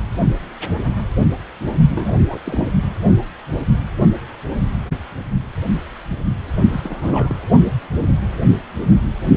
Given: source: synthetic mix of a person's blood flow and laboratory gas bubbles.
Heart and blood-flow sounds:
Doppler ultrasound of blood flow; precordium
1.90-2.18 s: bubbles
2.27-2.39 s: bubbles
2.44-2.68 s: bubbles
6.72-7.35 s: bubbles
From the record:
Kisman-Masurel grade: 221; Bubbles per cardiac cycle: several, 3 to 8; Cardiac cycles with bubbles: 10 to 50%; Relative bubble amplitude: barely perceptible (0.100 to 0.250); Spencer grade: 2 (many but less than half of the cardiac periods contain bubble signals, singularly or in groups); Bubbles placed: only in the low amplitude regions of the cardiac cycle

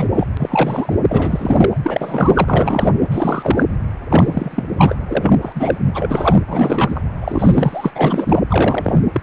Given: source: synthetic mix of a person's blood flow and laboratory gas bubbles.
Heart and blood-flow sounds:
Doppler ultrasound of blood flow; precordium
0.00-0.09 s: bubbles
0.14-0.27 s: bubbles
0.39-0.98 s: bubbles
1.08-1.77 s: bubbles
1.82-2.93 s: bubbles
3.11-3.65 s: bubbles
4.09-4.63 s: bubbles
4.77-4.96 s: bubbles
5.08-5.38 s: bubbles
5.42-5.78 s: bubbles
5.94-6.39 s: bubbles
6.47-7.01 s: bubbles
7.21-7.91 s: bubbles
7.95-8.41 s: bubbles
8.48-9.03 s: bubbles
9.12-9.21 s: bubbles
From the record:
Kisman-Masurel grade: 333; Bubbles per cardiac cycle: rolling drumbeat, 9 or more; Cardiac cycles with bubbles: 50 to 99%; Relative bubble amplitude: loud (0.450 to 0.775); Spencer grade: 3 (all of the cardiac periods contain showers or single bubble signals, but not dominating or overriding the cardiac motion signals); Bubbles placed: anywhere in the cardiac cycle

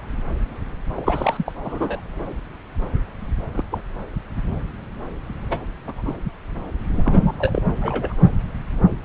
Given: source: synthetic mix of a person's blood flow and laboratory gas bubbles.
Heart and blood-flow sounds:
Doppler ultrasound of blood flow; subclavian vein
0.96-1.53 s: bubbles
1.65-2.00 s: bubbles
3.53-3.65 s: bubbles
3.71-3.79 s: bubbles
5.49-5.62 s: bubbles
5.87-5.93 s: bubbles
5.96-6.15 s: bubbles
6.93-7.32 s: bubbles
7.39-7.63 s: bubbles
7.82-8.14 s: bubbles
From the record:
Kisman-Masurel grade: 222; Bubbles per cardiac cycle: several, 3 to 8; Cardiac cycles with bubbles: 10 to 50%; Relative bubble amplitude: moderate (0.250 to 0.450); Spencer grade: 2 (many but less than half of the cardiac periods contain bubble signals, singularly or in groups); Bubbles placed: anywhere in the cardiac cycle

